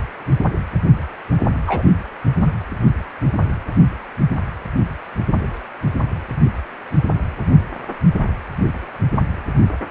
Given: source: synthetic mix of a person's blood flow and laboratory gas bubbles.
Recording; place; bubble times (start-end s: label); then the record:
Doppler ultrasound of blood flow; precordium
1.67-1.83 s: bubbles
2.39-2.55 s: bubbles
From the record:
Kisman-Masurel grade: 112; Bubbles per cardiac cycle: 1 to 2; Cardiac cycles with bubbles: 1 to 10%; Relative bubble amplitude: moderate (0.250 to 0.450); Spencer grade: 1 (occasional bubble signal discernible with the cardiac motion signal, with majority of cardiac periods free of bubbles); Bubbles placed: only in the low amplitude regions of the cardiac cycle